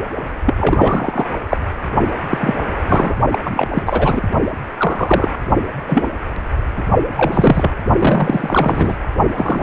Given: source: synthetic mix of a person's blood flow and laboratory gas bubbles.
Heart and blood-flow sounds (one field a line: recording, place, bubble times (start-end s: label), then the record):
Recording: Doppler ultrasound of blood flow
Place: precordium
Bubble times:
0.46-1.28 s: bubbles
1.49-1.57 s: bubbles
2.29-2.55 s: bubbles
2.88-3.15 s: bubbles
3.31-3.38 s: bubbles
3.44-3.69 s: bubbles
3.73-3.82 s: bubbles
3.85-4.21 s: bubbles
4.79-5.35 s: bubbles
5.87-6.08 s: bubbles
6.77-6.83 s: bubbles
7.17-7.71 s: bubbles
7.98-8.96 s: bubbles
9.35-9.62 s: bubbles
From the record:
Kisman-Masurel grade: 243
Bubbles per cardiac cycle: several, 3 to 8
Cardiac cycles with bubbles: 100%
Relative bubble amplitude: loud (0.450 to 0.775)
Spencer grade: 3 (all of the cardiac periods contain showers or single bubble signals, but not dominating or overriding the cardiac motion signals)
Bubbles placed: only in the low amplitude regions of the cardiac cycle